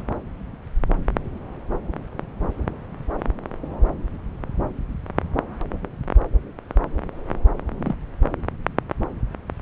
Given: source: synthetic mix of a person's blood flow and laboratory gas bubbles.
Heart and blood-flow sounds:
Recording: Doppler ultrasound of blood flow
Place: subclavian vein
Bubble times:
7.84-7.95 s: bubbles
From the record:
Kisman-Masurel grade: 111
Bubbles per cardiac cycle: 1 to 2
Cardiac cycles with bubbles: 1 to 10%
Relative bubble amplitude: barely perceptible (0.100 to 0.250)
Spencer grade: 1 (occasional bubble signal discernible with the cardiac motion signal, with majority of cardiac periods free of bubbles)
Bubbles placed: anywhere in the cardiac cycle

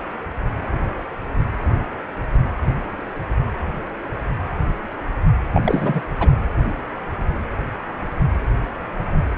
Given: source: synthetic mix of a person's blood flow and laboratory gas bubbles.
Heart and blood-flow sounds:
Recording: Doppler ultrasound of blood flow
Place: precordium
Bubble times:
5.53-6.01 s: bubbles
6.17-6.29 s: bubbles
From the record:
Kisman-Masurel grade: 212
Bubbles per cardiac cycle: several, 3 to 8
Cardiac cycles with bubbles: 1 to 10%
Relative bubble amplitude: moderate (0.250 to 0.450)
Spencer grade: 1 (occasional bubble signal discernible with the cardiac motion signal, with majority of cardiac periods free of bubbles)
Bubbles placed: anywhere in the cardiac cycle

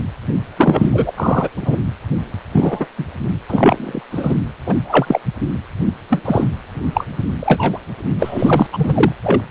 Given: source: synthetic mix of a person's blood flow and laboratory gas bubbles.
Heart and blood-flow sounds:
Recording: Doppler ultrasound of blood flow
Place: precordium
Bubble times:
0.56-1.11 s: bubbles
1.17-1.49 s: bubbles
1.56-1.78 s: bubbles
2.53-2.86 s: bubbles
2.98-3.04 s: bubbles
3.48-4.01 s: bubbles
4.11-4.35 s: bubbles
4.66-4.75 s: bubbles
4.85-5.21 s: bubbles
6.10-6.21 s: bubbles
6.25-6.46 s: bubbles
6.94-7.05 s: bubbles
7.41-7.78 s: bubbles
8.19-8.67 s: bubbles
8.72-9.12 s: bubbles
9.23-9.42 s: bubbles
From the record:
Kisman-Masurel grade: 243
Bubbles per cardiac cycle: several, 3 to 8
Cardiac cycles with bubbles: 100%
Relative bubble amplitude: loud (0.450 to 0.775)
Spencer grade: 3 (all of the cardiac periods contain showers or single bubble signals, but not dominating or overriding the cardiac motion signals)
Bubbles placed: anywhere in the cardiac cycle

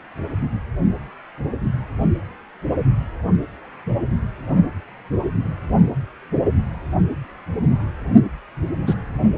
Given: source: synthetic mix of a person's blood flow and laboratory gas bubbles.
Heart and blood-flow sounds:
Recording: Doppler ultrasound of blood flow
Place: precordium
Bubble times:
8.87-8.95 s: bubbles
From the record:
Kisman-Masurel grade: 113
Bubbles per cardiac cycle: 1 to 2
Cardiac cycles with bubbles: 1 to 10%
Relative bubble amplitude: loud (0.450 to 0.775)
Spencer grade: 1 (occasional bubble signal discernible with the cardiac motion signal, with majority of cardiac periods free of bubbles)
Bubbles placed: anywhere in the cardiac cycle

